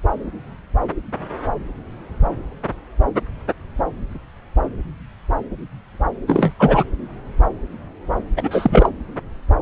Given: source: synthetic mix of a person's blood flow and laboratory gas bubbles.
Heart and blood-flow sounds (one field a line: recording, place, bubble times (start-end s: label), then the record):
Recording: Doppler ultrasound of blood flow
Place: subclavian vein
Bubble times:
6.26-6.53 s: bubbles
6.59-6.83 s: bubbles
8.37-8.89 s: bubbles
From the record:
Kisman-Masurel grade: 223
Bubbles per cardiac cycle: several, 3 to 8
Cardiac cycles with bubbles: 10 to 50%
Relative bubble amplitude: loud (0.450 to 0.775)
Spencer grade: 2 (many but less than half of the cardiac periods contain bubble signals, singularly or in groups)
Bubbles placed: anywhere in the cardiac cycle